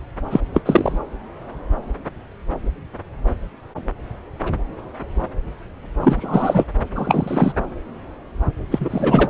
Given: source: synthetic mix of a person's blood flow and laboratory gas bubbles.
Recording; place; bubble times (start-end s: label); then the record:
Doppler ultrasound of blood flow; subclavian vein
0.30-0.41 s: bubbles
0.54-0.62 s: bubbles
0.65-0.99 s: bubbles
6.00-6.65 s: bubbles
6.95-7.52 s: bubbles
8.71-9.30 s: bubbles
From the record:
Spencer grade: 2 (many but less than half of the cardiac periods contain bubble signals, singularly or in groups); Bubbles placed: anywhere in the cardiac cycle